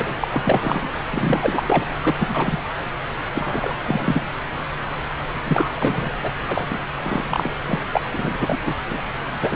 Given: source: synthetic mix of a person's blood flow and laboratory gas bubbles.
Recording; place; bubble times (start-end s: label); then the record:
Doppler ultrasound of blood flow; subclavian vein
0.00-0.14 s: bubbles
0.21-0.28 s: bubbles
0.32-0.90 s: bubbles
1.08-1.63 s: bubbles
1.67-1.85 s: bubbles
2.02-2.15 s: bubbles
2.19-2.61 s: bubbles
3.34-3.75 s: bubbles
3.83-4.23 s: bubbles
5.45-5.70 s: bubbles
5.75-6.16 s: bubbles
6.22-6.32 s: bubbles
6.47-6.66 s: bubbles
6.70-6.79 s: bubbles
7.03-7.27 s: bubbles
7.29-7.54 s: bubbles
7.67-7.80 s: bubbles
7.93-8.01 s: bubbles
8.10-8.58 s: bubbles
8.65-8.74 s: bubbles
8.90-8.98 s: bubbles
9.41-9.56 s: bubbles
From the record:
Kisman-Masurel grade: 342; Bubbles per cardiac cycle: rolling drumbeat, 9 or more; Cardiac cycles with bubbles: 100%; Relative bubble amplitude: moderate (0.250 to 0.450); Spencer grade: 3 (all of the cardiac periods contain showers or single bubble signals, but not dominating or overriding the cardiac motion signals); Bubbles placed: anywhere in the cardiac cycle